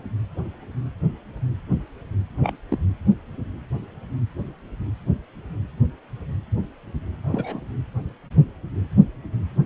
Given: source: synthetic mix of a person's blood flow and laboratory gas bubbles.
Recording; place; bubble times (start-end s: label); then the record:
Doppler ultrasound of blood flow; precordium
2.41-2.55 s: bubbles
2.71-2.79 s: bubbles
7.23-7.61 s: bubbles
From the record:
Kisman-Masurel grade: 112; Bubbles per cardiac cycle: 1 to 2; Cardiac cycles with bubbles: 1 to 10%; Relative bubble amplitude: moderate (0.250 to 0.450); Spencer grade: 1 (occasional bubble signal discernible with the cardiac motion signal, with majority of cardiac periods free of bubbles); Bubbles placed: anywhere in the cardiac cycle